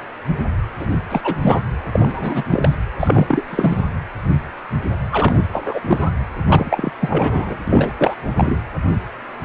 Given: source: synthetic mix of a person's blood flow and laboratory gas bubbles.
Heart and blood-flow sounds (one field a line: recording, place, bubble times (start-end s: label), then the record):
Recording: Doppler ultrasound of blood flow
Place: precordium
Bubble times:
0.79-0.87 s: bubbles
0.89-0.98 s: bubbles
1.10-1.35 s: bubbles
1.42-1.62 s: bubbles
1.92-2.44 s: bubbles
2.50-2.75 s: bubbles
2.99-3.44 s: bubbles
3.48-3.84 s: bubbles
5.11-5.43 s: bubbles
5.52-6.09 s: bubbles
6.48-6.92 s: bubbles
7.00-7.57 s: bubbles
7.67-7.92 s: bubbles
7.98-8.15 s: bubbles
8.36-8.62 s: bubbles
From the record:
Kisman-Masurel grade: 333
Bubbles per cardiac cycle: rolling drumbeat, 9 or more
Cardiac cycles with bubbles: 50 to 99%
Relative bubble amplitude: loud (0.450 to 0.775)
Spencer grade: 3 (all of the cardiac periods contain showers or single bubble signals, but not dominating or overriding the cardiac motion signals)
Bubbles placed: anywhere in the cardiac cycle